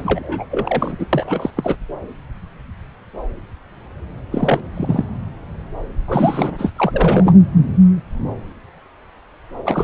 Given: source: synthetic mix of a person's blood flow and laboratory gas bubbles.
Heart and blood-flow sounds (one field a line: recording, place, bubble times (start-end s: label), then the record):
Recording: Doppler ultrasound of blood flow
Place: subclavian vein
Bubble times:
0.00-0.46 s: bubbles
0.51-0.96 s: bubbles
0.98-1.06 s: bubbles
1.12-1.50 s: bubbles
1.56-1.77 s: bubbles
4.32-4.60 s: bubbles
4.74-5.05 s: bubbles
6.08-6.73 s: bubbles
6.77-7.38 s: bubbles
9.65-9.84 s: bubbles
From the record:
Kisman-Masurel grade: 332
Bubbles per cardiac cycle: rolling drumbeat, 9 or more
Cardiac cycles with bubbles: 50 to 99%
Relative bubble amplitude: moderate (0.250 to 0.450)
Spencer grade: 3 (all of the cardiac periods contain showers or single bubble signals, but not dominating or overriding the cardiac motion signals)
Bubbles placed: anywhere in the cardiac cycle